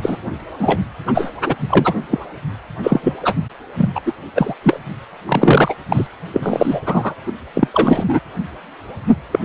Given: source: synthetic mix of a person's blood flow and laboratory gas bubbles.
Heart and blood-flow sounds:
Doppler ultrasound of blood flow; precordium
0.02-0.18 s: bubbles
0.59-0.80 s: bubbles
1.06-1.30 s: bubbles
1.46-1.54 s: bubbles
1.69-1.94 s: bubbles
2.10-2.19 s: bubbles
2.83-3.00 s: bubbles
3.03-3.14 s: bubbles
3.23-3.33 s: bubbles
3.77-3.90 s: bubbles
3.95-4.01 s: bubbles
4.06-4.13 s: bubbles
4.36-4.54 s: bubbles
4.63-4.79 s: bubbles
5.26-5.75 s: bubbles
5.88-6.07 s: bubbles
6.33-6.81 s: bubbles
6.86-7.15 s: bubbles
7.26-7.32 s: bubbles
7.54-7.67 s: bubbles
7.74-8.04 s: bubbles
8.08-8.20 s: bubbles
9.32-9.39 s: bubbles
From the record:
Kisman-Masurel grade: 233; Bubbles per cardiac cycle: several, 3 to 8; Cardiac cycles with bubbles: 50 to 99%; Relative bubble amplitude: loud (0.450 to 0.775); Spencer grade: 3 (all of the cardiac periods contain showers or single bubble signals, but not dominating or overriding the cardiac motion signals); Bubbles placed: anywhere in the cardiac cycle

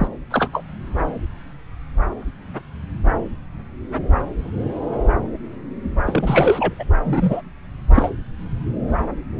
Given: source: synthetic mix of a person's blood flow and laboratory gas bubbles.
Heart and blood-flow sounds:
Doppler ultrasound of blood flow; subclavian vein
0.00-0.08 s: bubbles
0.30-0.48 s: bubbles
0.53-0.62 s: bubbles
6.06-6.74 s: bubbles
6.79-6.83 s: bubbles
7.04-7.42 s: bubbles
7.94-8.10 s: bubbles
From the record:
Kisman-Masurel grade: 222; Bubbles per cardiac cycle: several, 3 to 8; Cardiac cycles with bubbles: 10 to 50%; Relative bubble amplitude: moderate (0.250 to 0.450); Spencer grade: 2 (many but less than half of the cardiac periods contain bubble signals, singularly or in groups); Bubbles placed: anywhere in the cardiac cycle

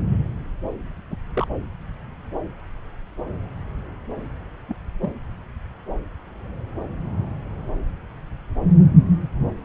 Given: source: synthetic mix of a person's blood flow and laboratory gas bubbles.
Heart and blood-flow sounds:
Doppler ultrasound of blood flow; subclavian vein
1.10-1.16 s: bubbles
1.34-1.46 s: bubbles
4.68-4.75 s: bubbles
5.02-5.12 s: bubbles
From the record:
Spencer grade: 2 (many but less than half of the cardiac periods contain bubble signals, singularly or in groups); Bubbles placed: anywhere in the cardiac cycle

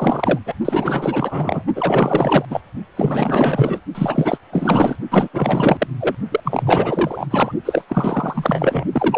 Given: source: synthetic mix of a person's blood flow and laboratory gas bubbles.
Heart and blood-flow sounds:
Doppler ultrasound of blood flow; precordium
0.00-0.38 s: bubbles
0.46-0.54 s: bubbles
0.65-1.63 s: bubbles
1.75-2.45 s: bubbles
2.50-2.60 s: bubbles
2.96-3.80 s: bubbles
3.95-4.38 s: bubbles
4.52-4.96 s: bubbles
5.10-5.28 s: bubbles
5.33-5.88 s: bubbles
6.00-6.15 s: bubbles
6.31-6.40 s: bubbles
6.45-7.26 s: bubbles
7.30-7.52 s: bubbles
7.65-7.84 s: bubbles
7.88-8.85 s: bubbles
8.92-9.18 s: bubbles
From the record:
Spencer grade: 4 (maximum detectable bubble signal sounding continuously throughout systole and diastole of every cardiac period, and overriding the amplitude of the normal cardiac signals); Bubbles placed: only in the low amplitude regions of the cardiac cycle

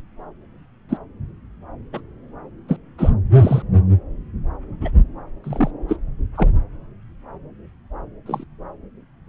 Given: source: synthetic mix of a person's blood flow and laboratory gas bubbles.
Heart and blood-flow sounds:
Doppler ultrasound of blood flow; subclavian vein
0.89-0.97 s: bubbles
1.92-2.00 s: bubbles
2.68-2.76 s: bubbles
2.98-3.10 s: bubbles
3.34-3.62 s: bubbles
4.81-4.92 s: bubbles
5.44-5.71 s: bubbles
5.88-5.96 s: bubbles
6.35-6.48 s: bubbles
8.26-8.44 s: bubbles
From the record:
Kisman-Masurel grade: 122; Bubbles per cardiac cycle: 1 to 2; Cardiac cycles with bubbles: 10 to 50%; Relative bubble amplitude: moderate (0.250 to 0.450); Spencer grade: 2 (many but less than half of the cardiac periods contain bubble signals, singularly or in groups); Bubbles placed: anywhere in the cardiac cycle

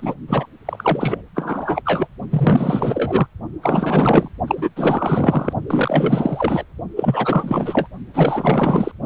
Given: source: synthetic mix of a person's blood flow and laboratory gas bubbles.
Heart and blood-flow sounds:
Doppler ultrasound of blood flow; precordium
0.00-0.14 s: bubbles
0.28-0.46 s: bubbles
0.65-1.21 s: bubbles
1.35-1.82 s: bubbles
1.85-2.08 s: bubbles
2.30-3.27 s: bubbles
3.62-4.29 s: bubbles
4.47-4.69 s: bubbles
4.75-5.54 s: bubbles
5.67-6.64 s: bubbles
6.96-7.87 s: bubbles
8.13-8.91 s: bubbles
From the record:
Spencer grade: 4 (maximum detectable bubble signal sounding continuously throughout systole and diastole of every cardiac period, and overriding the amplitude of the normal cardiac signals); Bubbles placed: only in the low amplitude regions of the cardiac cycle

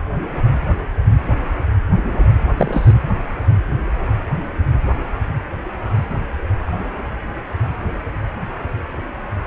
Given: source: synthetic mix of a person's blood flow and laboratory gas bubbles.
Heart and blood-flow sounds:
Doppler ultrasound of blood flow; precordium
2.57-2.93 s: bubbles
From the record:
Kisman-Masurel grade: 113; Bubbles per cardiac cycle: 1 to 2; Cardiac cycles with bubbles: 1 to 10%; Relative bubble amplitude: loud (0.450 to 0.775); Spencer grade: 1 (occasional bubble signal discernible with the cardiac motion signal, with majority of cardiac periods free of bubbles); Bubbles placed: anywhere in the cardiac cycle

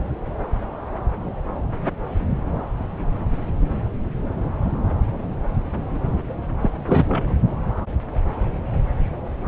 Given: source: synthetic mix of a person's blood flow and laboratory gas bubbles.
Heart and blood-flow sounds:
Doppler ultrasound of blood flow; subclavian vein
6.60-7.38 s: bubbles
From the record:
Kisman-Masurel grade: 212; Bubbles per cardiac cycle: several, 3 to 8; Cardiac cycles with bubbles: 1 to 10%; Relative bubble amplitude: moderate (0.250 to 0.450); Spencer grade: 1 (occasional bubble signal discernible with the cardiac motion signal, with majority of cardiac periods free of bubbles); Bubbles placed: anywhere in the cardiac cycle

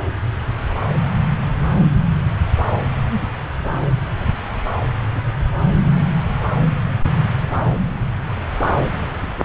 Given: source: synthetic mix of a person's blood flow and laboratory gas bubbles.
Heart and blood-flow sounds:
Doppler ultrasound of blood flow; subclavian vein
no bubbles
From the record:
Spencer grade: 0 (complete lack of bubble signals)

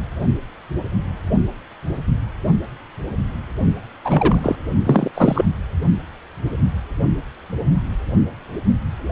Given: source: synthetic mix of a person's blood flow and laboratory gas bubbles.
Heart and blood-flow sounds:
Doppler ultrasound of blood flow; precordium
4.04-4.55 s: bubbles
4.86-5.11 s: bubbles
5.15-5.45 s: bubbles
From the record:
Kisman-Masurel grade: 223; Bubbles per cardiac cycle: several, 3 to 8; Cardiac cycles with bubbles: 10 to 50%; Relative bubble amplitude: loud (0.450 to 0.775); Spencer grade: 2 (many but less than half of the cardiac periods contain bubble signals, singularly or in groups); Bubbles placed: only in the low amplitude regions of the cardiac cycle

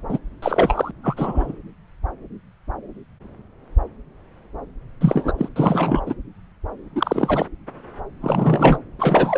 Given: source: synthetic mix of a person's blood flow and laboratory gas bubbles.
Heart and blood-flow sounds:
Doppler ultrasound of blood flow; subclavian vein
0.09-0.19 s: bubbles
0.42-0.91 s: bubbles
1.03-1.59 s: bubbles
5.00-5.33 s: bubbles
5.38-5.49 s: bubbles
5.56-6.04 s: bubbles
6.06-6.14 s: bubbles
6.95-7.46 s: bubbles
8.21-8.78 s: bubbles
8.98-9.38 s: bubbles
From the record:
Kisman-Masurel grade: 233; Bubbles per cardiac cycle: several, 3 to 8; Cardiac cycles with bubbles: 50 to 99%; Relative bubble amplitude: loud (0.450 to 0.775); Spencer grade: 3 (all of the cardiac periods contain showers or single bubble signals, but not dominating or overriding the cardiac motion signals); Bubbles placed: anywhere in the cardiac cycle

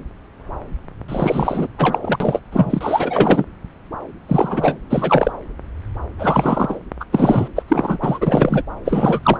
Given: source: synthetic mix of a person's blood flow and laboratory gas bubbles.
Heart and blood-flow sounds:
Doppler ultrasound of blood flow; subclavian vein
1.08-1.67 s: bubbles
1.77-1.98 s: bubbles
2.01-2.40 s: bubbles
2.52-3.44 s: bubbles
4.29-4.77 s: bubbles
4.90-5.32 s: bubbles
6.19-6.79 s: bubbles
7.00-7.05 s: bubbles
7.12-7.49 s: bubbles
7.56-7.62 s: bubbles
7.68-8.62 s: bubbles
8.85-9.20 s: bubbles
9.22-9.38 s: bubbles
From the record:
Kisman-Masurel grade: 333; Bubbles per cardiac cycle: rolling drumbeat, 9 or more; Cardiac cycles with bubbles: 50 to 99%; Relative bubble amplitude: loud (0.450 to 0.775); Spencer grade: 3 (all of the cardiac periods contain showers or single bubble signals, but not dominating or overriding the cardiac motion signals); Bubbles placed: anywhere in the cardiac cycle

